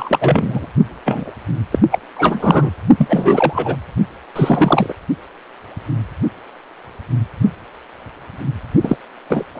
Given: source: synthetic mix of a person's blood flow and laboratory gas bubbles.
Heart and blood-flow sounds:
Doppler ultrasound of blood flow; precordium
0.00-0.68 s: bubbles
1.05-1.32 s: bubbles
1.71-1.79 s: bubbles
1.91-1.99 s: bubbles
2.16-2.70 s: bubbles
2.98-3.76 s: bubbles
4.35-4.93 s: bubbles
8.82-8.96 s: bubbles
9.29-9.44 s: bubbles
9.54-9.60 s: bubbles
From the record:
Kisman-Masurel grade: 333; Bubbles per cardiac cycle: rolling drumbeat, 9 or more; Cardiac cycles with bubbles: 50 to 99%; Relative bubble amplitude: loud (0.450 to 0.775); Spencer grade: 3 (all of the cardiac periods contain showers or single bubble signals, but not dominating or overriding the cardiac motion signals); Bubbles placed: only in the low amplitude regions of the cardiac cycle

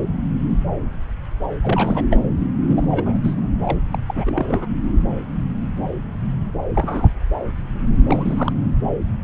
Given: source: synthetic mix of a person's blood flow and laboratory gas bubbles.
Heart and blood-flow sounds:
Doppler ultrasound of blood flow; subclavian vein
1.62-2.06 s: bubbles
2.10-2.17 s: bubbles
2.67-3.19 s: bubbles
3.23-3.35 s: bubbles
3.65-3.79 s: bubbles
3.91-3.98 s: bubbles
4.08-4.67 s: bubbles
6.75-7.08 s: bubbles
8.07-8.52 s: bubbles
From the record:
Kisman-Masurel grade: 222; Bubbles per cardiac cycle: several, 3 to 8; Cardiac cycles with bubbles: 10 to 50%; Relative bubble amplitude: moderate (0.250 to 0.450); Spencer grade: 2 (many but less than half of the cardiac periods contain bubble signals, singularly or in groups); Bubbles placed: anywhere in the cardiac cycle

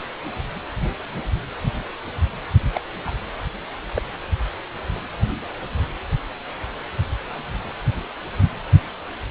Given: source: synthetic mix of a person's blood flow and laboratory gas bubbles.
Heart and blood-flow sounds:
Doppler ultrasound of blood flow; precordium
2.74-2.80 s: bubbles
3.06-3.11 s: bubbles
3.95-4.02 s: bubbles
From the record:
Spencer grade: 2 (many but less than half of the cardiac periods contain bubble signals, singularly or in groups); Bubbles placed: only in the low amplitude regions of the cardiac cycle

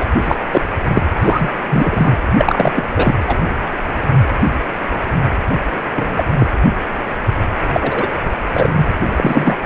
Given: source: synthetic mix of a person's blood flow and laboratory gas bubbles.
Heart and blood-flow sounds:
Doppler ultrasound of blood flow; precordium
0.00-0.05 s: bubbles
0.24-0.35 s: bubbles
0.52-0.61 s: bubbles
0.95-1.02 s: bubbles
1.22-1.49 s: bubbles
1.69-2.17 s: bubbles
2.38-2.72 s: bubbles
2.75-2.84 s: bubbles
2.96-3.15 s: bubbles
3.27-3.37 s: bubbles
5.96-6.24 s: bubbles
6.38-6.47 s: bubbles
7.72-8.08 s: bubbles
8.53-8.70 s: bubbles
8.73-8.88 s: bubbles
9.18-9.56 s: bubbles
From the record:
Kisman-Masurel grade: 233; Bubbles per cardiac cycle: several, 3 to 8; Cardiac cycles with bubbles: 50 to 99%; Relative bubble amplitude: loud (0.450 to 0.775); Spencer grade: 3 (all of the cardiac periods contain showers or single bubble signals, but not dominating or overriding the cardiac motion signals); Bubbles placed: anywhere in the cardiac cycle

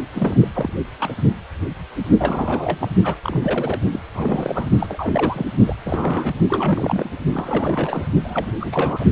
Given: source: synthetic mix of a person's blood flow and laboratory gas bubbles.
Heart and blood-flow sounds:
Doppler ultrasound of blood flow; precordium
0.14-0.38 s: bubbles
0.41-0.48 s: bubbles
0.53-0.73 s: bubbles
0.99-1.15 s: bubbles
2.19-2.88 s: bubbles
3.03-3.19 s: bubbles
3.23-3.81 s: bubbles
3.92-3.99 s: bubbles
4.15-4.71 s: bubbles
4.79-5.46 s: bubbles
5.67-5.75 s: bubbles
5.85-6.34 s: bubbles
6.49-7.10 s: bubbles
7.33-8.07 s: bubbles
8.24-8.51 s: bubbles
8.60-9.05 s: bubbles
From the record:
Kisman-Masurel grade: 332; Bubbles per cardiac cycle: rolling drumbeat, 9 or more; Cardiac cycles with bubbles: 50 to 99%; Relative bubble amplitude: moderate (0.250 to 0.450); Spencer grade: 3 (all of the cardiac periods contain showers or single bubble signals, but not dominating or overriding the cardiac motion signals); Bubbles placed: only in the low amplitude regions of the cardiac cycle

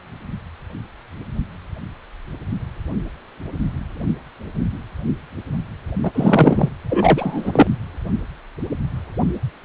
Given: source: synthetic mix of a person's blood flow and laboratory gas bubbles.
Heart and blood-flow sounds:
Doppler ultrasound of blood flow; precordium
6.03-6.10 s: bubbles
6.14-6.69 s: bubbles
6.89-7.67 s: bubbles
From the record:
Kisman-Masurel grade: 223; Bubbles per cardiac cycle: several, 3 to 8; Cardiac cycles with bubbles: 10 to 50%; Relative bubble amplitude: loud (0.450 to 0.775); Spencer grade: 2 (many but less than half of the cardiac periods contain bubble signals, singularly or in groups); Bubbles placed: anywhere in the cardiac cycle

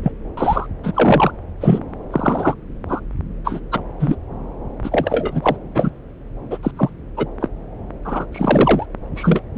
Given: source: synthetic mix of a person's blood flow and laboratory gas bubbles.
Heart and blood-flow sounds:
Doppler ultrasound of blood flow; subclavian vein
0.02-0.12 s: bubbles
0.37-0.67 s: bubbles
0.83-0.91 s: bubbles
0.94-1.31 s: bubbles
1.60-1.79 s: bubbles
2.12-2.54 s: bubbles
2.88-3.00 s: bubbles
3.44-3.60 s: bubbles
3.71-3.80 s: bubbles
3.99-4.16 s: bubbles
4.83-5.57 s: bubbles
5.75-5.91 s: bubbles
6.51-6.58 s: bubbles
6.63-6.71 s: bubbles
6.77-6.90 s: bubbles
7.17-7.26 s: bubbles
7.41-7.48 s: bubbles
8.04-8.26 s: bubbles
8.32-8.86 s: bubbles
9.16-9.42 s: bubbles
9.55-9.58 s: bubbles
From the record:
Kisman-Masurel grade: 243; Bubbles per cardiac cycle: several, 3 to 8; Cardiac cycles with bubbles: 100%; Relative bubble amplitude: loud (0.450 to 0.775); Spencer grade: 3 (all of the cardiac periods contain showers or single bubble signals, but not dominating or overriding the cardiac motion signals); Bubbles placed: anywhere in the cardiac cycle

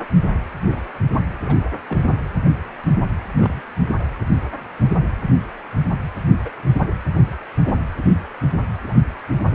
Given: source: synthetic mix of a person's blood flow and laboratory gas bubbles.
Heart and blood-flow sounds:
Doppler ultrasound of blood flow; precordium
0.65-0.82 s: bubbles
1.12-1.20 s: bubbles
1.46-1.56 s: bubbles
1.89-2.08 s: bubbles
3.29-3.32 s: bubbles
3.36-3.63 s: bubbles
6.30-6.50 s: bubbles
7.14-7.35 s: bubbles
7.67-7.72 s: bubbles
8.88-8.94 s: bubbles
9.49-9.55 s: bubbles
From the record:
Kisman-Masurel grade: 121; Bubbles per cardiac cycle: 1 to 2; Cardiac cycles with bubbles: 10 to 50%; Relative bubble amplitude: barely perceptible (0.100 to 0.250); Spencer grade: 2 (many but less than half of the cardiac periods contain bubble signals, singularly or in groups); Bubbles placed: anywhere in the cardiac cycle

